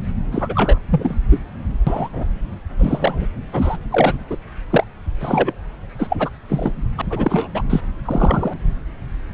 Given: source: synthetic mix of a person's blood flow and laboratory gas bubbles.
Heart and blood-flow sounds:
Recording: Doppler ultrasound of blood flow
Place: subclavian vein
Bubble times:
0.32-0.78 s: bubbles
0.91-1.16 s: bubbles
1.30-1.40 s: bubbles
1.86-2.09 s: bubbles
2.13-2.38 s: bubbles
2.79-3.26 s: bubbles
3.52-3.77 s: bubbles
3.91-4.13 s: bubbles
4.29-4.37 s: bubbles
4.70-4.84 s: bubbles
5.20-5.51 s: bubbles
5.99-6.17 s: bubbles
6.19-6.29 s: bubbles
6.49-6.72 s: bubbles
6.97-7.01 s: bubbles
7.10-7.48 s: bubbles
7.54-7.62 s: bubbles
7.70-7.80 s: bubbles
8.05-8.54 s: bubbles
From the record:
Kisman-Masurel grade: 243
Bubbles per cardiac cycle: several, 3 to 8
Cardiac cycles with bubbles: 100%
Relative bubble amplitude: loud (0.450 to 0.775)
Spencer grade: 3 (all of the cardiac periods contain showers or single bubble signals, but not dominating or overriding the cardiac motion signals)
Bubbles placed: anywhere in the cardiac cycle

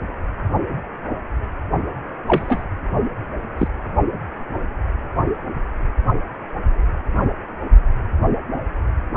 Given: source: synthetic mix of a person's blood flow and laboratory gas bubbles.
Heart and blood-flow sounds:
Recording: Doppler ultrasound of blood flow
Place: precordium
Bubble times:
2.27-2.63 s: bubbles
3.58-3.68 s: bubbles
From the record:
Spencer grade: 2 (many but less than half of the cardiac periods contain bubble signals, singularly or in groups)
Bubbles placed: only in the low amplitude regions of the cardiac cycle

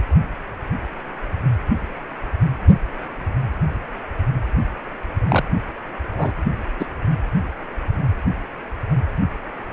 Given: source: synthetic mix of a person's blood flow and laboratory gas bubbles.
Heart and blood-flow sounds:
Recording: Doppler ultrasound of blood flow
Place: precordium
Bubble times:
5.29-5.43 s: bubbles
6.17-6.33 s: bubbles
6.79-6.86 s: bubbles
From the record:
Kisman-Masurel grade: 122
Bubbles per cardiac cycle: 1 to 2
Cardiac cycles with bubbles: 10 to 50%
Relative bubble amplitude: moderate (0.250 to 0.450)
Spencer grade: 2 (many but less than half of the cardiac periods contain bubble signals, singularly or in groups)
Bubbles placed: anywhere in the cardiac cycle

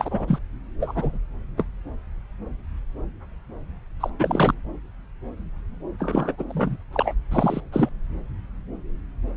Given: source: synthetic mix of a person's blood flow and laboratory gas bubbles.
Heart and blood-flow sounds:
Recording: Doppler ultrasound of blood flow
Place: subclavian vein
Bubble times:
0.00-0.39 s: bubbles
0.80-1.19 s: bubbles
1.57-1.65 s: bubbles
4.00-4.10 s: bubbles
4.19-4.54 s: bubbles
5.99-6.32 s: bubbles
6.38-6.43 s: bubbles
6.49-6.76 s: bubbles
6.92-7.14 s: bubbles
7.31-7.60 s: bubbles
7.72-7.89 s: bubbles
From the record:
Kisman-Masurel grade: 232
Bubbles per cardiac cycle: several, 3 to 8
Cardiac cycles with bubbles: 50 to 99%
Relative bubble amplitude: moderate (0.250 to 0.450)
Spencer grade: 3 (all of the cardiac periods contain showers or single bubble signals, but not dominating or overriding the cardiac motion signals)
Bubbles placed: anywhere in the cardiac cycle

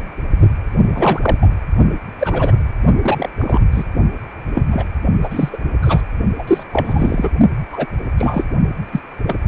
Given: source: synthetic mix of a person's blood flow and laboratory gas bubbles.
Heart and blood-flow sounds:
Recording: Doppler ultrasound of blood flow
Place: precordium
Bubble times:
0.94-1.36 s: bubbles
1.42-1.47 s: bubbles
2.19-2.56 s: bubbles
3.02-3.29 s: bubbles
3.39-3.60 s: bubbles
3.71-3.84 s: bubbles
4.54-4.84 s: bubbles
5.21-5.49 s: bubbles
5.52-5.58 s: bubbles
5.82-6.02 s: bubbles
6.38-6.43 s: bubbles
6.47-6.63 s: bubbles
6.72-7.31 s: bubbles
7.72-7.87 s: bubbles
8.17-8.45 s: bubbles
8.91-9.00 s: bubbles
9.26-9.38 s: bubbles
From the record:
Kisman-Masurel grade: 243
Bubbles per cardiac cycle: several, 3 to 8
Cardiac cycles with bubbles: 100%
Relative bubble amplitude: loud (0.450 to 0.775)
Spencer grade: 3 (all of the cardiac periods contain showers or single bubble signals, but not dominating or overriding the cardiac motion signals)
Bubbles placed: only in the low amplitude regions of the cardiac cycle

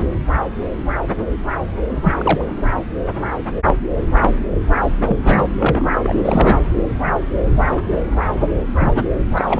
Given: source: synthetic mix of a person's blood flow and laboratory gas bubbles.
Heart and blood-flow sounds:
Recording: Doppler ultrasound of blood flow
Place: subclavian vein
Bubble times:
2.04-2.12 s: bubbles
2.18-2.46 s: bubbles
5.06-5.17 s: bubbles
5.24-5.46 s: bubbles
5.59-5.96 s: bubbles
6.04-6.15 s: bubbles
6.25-6.60 s: bubbles
8.78-9.11 s: bubbles
9.35-9.60 s: bubbles
From the record:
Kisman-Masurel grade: 223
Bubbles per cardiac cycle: several, 3 to 8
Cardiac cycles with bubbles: 10 to 50%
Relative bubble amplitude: loud (0.450 to 0.775)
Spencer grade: 2 (many but less than half of the cardiac periods contain bubble signals, singularly or in groups)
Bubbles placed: anywhere in the cardiac cycle

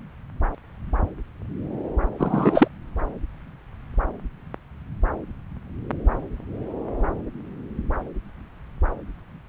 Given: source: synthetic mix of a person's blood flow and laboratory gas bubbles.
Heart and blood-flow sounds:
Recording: Doppler ultrasound of blood flow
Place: subclavian vein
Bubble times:
2.18-2.67 s: bubbles
From the record:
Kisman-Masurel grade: 213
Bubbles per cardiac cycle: several, 3 to 8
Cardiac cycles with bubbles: 1 to 10%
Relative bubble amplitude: loud (0.450 to 0.775)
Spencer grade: 1 (occasional bubble signal discernible with the cardiac motion signal, with majority of cardiac periods free of bubbles)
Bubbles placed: anywhere in the cardiac cycle

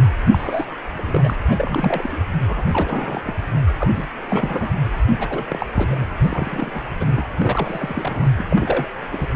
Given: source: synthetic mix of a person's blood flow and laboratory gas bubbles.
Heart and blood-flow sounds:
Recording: Doppler ultrasound of blood flow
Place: precordium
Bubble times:
0.00-0.07 s: bubbles
0.33-0.65 s: bubbles
0.97-1.35 s: bubbles
1.48-2.10 s: bubbles
2.12-2.17 s: bubbles
2.48-3.21 s: bubbles
3.24-3.33 s: bubbles
3.67-3.71 s: bubbles
3.78-3.90 s: bubbles
3.93-4.06 s: bubbles
4.29-4.68 s: bubbles
5.19-5.65 s: bubbles
5.73-6.04 s: bubbles
6.22-6.83 s: bubbles
7.00-7.25 s: bubbles
7.30-7.32 s: bubbles
7.38-8.28 s: bubbles
8.36-8.46 s: bubbles
8.49-8.88 s: bubbles
9.12-9.28 s: bubbles
From the record:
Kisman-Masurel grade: 342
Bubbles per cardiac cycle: rolling drumbeat, 9 or more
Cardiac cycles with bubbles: 100%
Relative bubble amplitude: moderate (0.250 to 0.450)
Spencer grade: 3 (all of the cardiac periods contain showers or single bubble signals, but not dominating or overriding the cardiac motion signals)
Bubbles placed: anywhere in the cardiac cycle

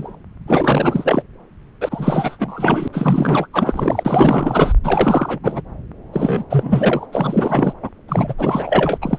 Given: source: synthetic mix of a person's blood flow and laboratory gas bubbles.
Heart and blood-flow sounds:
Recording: Doppler ultrasound of blood flow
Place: subclavian vein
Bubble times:
0.00-0.15 s: bubbles
0.47-1.22 s: bubbles
1.80-2.88 s: bubbles
2.93-3.48 s: bubbles
3.53-4.73 s: bubbles
4.83-5.39 s: bubbles
5.42-5.62 s: bubbles
6.12-6.44 s: bubbles
6.50-7.05 s: bubbles
7.12-7.73 s: bubbles
7.82-7.89 s: bubbles
8.08-8.34 s: bubbles
8.38-8.98 s: bubbles
9.02-9.19 s: bubbles
From the record:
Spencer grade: 4 (maximum detectable bubble signal sounding continuously throughout systole and diastole of every cardiac period, and overriding the amplitude of the normal cardiac signals)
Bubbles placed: anywhere in the cardiac cycle

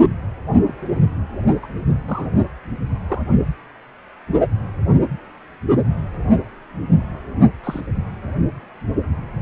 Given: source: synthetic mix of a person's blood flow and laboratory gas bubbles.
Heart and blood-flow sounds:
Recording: Doppler ultrasound of blood flow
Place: precordium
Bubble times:
0.68-0.73 s: bubbles
1.62-1.67 s: bubbles
2.08-2.31 s: bubbles
3.07-3.22 s: bubbles
7.64-7.81 s: bubbles
From the record:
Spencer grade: 2 (many but less than half of the cardiac periods contain bubble signals, singularly or in groups)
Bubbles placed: anywhere in the cardiac cycle

